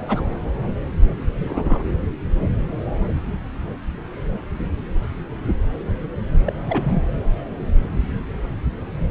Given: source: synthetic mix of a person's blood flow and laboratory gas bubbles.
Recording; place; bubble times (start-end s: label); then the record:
Doppler ultrasound of blood flow; subclavian vein
0.08-0.24 s: bubbles
1.40-1.83 s: bubbles
6.45-6.53 s: bubbles
6.68-7.03 s: bubbles
From the record:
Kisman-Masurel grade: 222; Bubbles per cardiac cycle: several, 3 to 8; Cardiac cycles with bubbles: 10 to 50%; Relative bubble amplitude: moderate (0.250 to 0.450); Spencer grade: 2 (many but less than half of the cardiac periods contain bubble signals, singularly or in groups); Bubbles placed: anywhere in the cardiac cycle